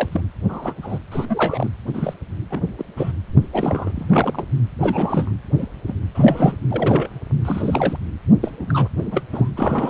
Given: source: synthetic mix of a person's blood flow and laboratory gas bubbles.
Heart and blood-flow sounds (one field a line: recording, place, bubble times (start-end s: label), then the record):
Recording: Doppler ultrasound of blood flow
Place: precordium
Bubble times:
0.00-0.21 s: bubbles
0.49-0.73 s: bubbles
0.82-0.99 s: bubbles
1.11-1.25 s: bubbles
1.28-1.70 s: bubbles
1.86-2.14 s: bubbles
2.50-2.64 s: bubbles
2.78-2.84 s: bubbles
2.97-3.12 s: bubbles
3.53-3.92 s: bubbles
3.95-4.44 s: bubbles
4.81-5.31 s: bubbles
5.58-5.67 s: bubbles
5.87-5.94 s: bubbles
6.14-6.56 s: bubbles
6.71-7.08 s: bubbles
7.45-7.96 s: bubbles
8.43-8.88 s: bubbles
9.11-9.23 s: bubbles
9.32-9.50 s: bubbles
9.55-9.90 s: bubbles
From the record:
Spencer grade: 3 (all of the cardiac periods contain showers or single bubble signals, but not dominating or overriding the cardiac motion signals)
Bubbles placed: anywhere in the cardiac cycle